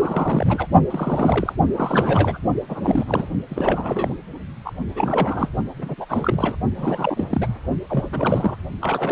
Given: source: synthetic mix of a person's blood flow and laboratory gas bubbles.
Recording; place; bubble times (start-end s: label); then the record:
Doppler ultrasound of blood flow; precordium
0.00-0.68 s: bubbles
0.90-1.54 s: bubbles
1.75-2.39 s: bubbles
2.69-3.29 s: bubbles
3.50-4.17 s: bubbles
4.65-4.71 s: bubbles
4.88-5.49 s: bubbles
5.78-5.95 s: bubbles
5.97-6.05 s: bubbles
6.08-6.55 s: bubbles
6.74-7.58 s: bubbles
7.90-8.57 s: bubbles
8.81-9.12 s: bubbles
From the record:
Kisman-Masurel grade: 332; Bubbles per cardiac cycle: rolling drumbeat, 9 or more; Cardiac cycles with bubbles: 50 to 99%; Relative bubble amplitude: moderate (0.250 to 0.450); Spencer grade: 3 (all of the cardiac periods contain showers or single bubble signals, but not dominating or overriding the cardiac motion signals); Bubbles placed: only in the low amplitude regions of the cardiac cycle